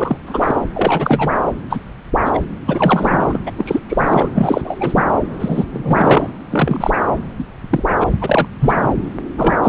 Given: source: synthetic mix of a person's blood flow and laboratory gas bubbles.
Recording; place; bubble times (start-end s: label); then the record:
Doppler ultrasound of blood flow; subclavian vein
0.00-0.17 s: bubbles
0.26-0.60 s: bubbles
0.74-1.33 s: bubbles
1.70-1.79 s: bubbles
2.25-2.39 s: bubbles
2.65-3.38 s: bubbles
3.46-3.51 s: bubbles
3.57-3.80 s: bubbles
3.88-4.29 s: bubbles
4.34-4.61 s: bubbles
4.63-4.77 s: bubbles
4.80-5.04 s: bubbles
5.39-5.65 s: bubbles
5.72-6.29 s: bubbles
6.50-6.91 s: bubbles
7.38-7.44 s: bubbles
7.70-7.83 s: bubbles
8.00-8.07 s: bubbles
8.21-8.48 s: bubbles
8.60-8.92 s: bubbles
9.38-9.56 s: bubbles
9.62-9.69 s: bubbles
From the record:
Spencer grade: 3 (all of the cardiac periods contain showers or single bubble signals, but not dominating or overriding the cardiac motion signals); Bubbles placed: anywhere in the cardiac cycle